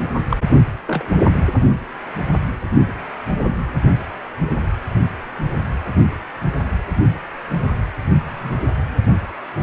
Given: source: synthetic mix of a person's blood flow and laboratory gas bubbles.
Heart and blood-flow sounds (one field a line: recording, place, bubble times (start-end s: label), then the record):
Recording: Doppler ultrasound of blood flow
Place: precordium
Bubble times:
0.29-0.37 s: bubbles
0.87-1.23 s: bubbles
1.62-1.68 s: bubbles
8.25-8.57 s: bubbles
From the record:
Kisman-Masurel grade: 122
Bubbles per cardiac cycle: 1 to 2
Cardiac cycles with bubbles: 10 to 50%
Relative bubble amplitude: moderate (0.250 to 0.450)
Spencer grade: 2 (many but less than half of the cardiac periods contain bubble signals, singularly or in groups)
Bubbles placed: anywhere in the cardiac cycle